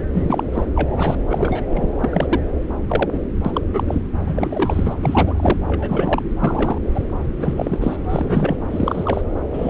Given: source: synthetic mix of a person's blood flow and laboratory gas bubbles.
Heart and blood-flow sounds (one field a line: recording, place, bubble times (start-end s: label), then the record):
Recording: Doppler ultrasound of blood flow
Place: subclavian vein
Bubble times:
0.13-0.43 s: bubbles
0.52-0.65 s: bubbles
0.75-1.19 s: bubbles
1.29-1.64 s: bubbles
1.70-1.87 s: bubbles
2.00-2.27 s: bubbles
2.29-2.40 s: bubbles
2.88-3.09 s: bubbles
3.12-3.20 s: bubbles
3.45-3.61 s: bubbles
3.73-3.83 s: bubbles
3.88-4.01 s: bubbles
4.26-4.94 s: bubbles
5.02-5.56 s: bubbles
5.67-6.22 s: bubbles
6.39-6.78 s: bubbles
6.94-7.03 s: bubbles
7.39-7.96 s: bubbles
8.09-8.56 s: bubbles
8.70-9.21 s: bubbles
9.53-9.70 s: bubbles
From the record:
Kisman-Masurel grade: 242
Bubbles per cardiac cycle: several, 3 to 8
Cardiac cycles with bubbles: 100%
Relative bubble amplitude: moderate (0.250 to 0.450)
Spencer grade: 3 (all of the cardiac periods contain showers or single bubble signals, but not dominating or overriding the cardiac motion signals)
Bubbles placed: anywhere in the cardiac cycle